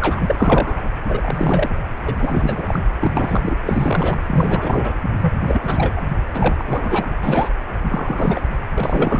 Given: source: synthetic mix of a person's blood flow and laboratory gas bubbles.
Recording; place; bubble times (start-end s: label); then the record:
Doppler ultrasound of blood flow; precordium
0.00-0.90 s: bubbles
1.09-1.70 s: bubbles
2.04-2.79 s: bubbles
3.00-3.12 s: bubbles
3.17-3.41 s: bubbles
3.44-3.55 s: bubbles
3.65-4.18 s: bubbles
4.26-4.93 s: bubbles
5.21-5.32 s: bubbles
5.47-5.93 s: bubbles
5.96-6.01 s: bubbles
6.34-7.07 s: bubbles
7.23-7.49 s: bubbles
7.82-8.41 s: bubbles
8.75-9.19 s: bubbles
From the record:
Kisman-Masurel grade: 342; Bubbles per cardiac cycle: rolling drumbeat, 9 or more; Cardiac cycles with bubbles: 100%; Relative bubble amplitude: moderate (0.250 to 0.450); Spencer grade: 3 (all of the cardiac periods contain showers or single bubble signals, but not dominating or overriding the cardiac motion signals); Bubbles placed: anywhere in the cardiac cycle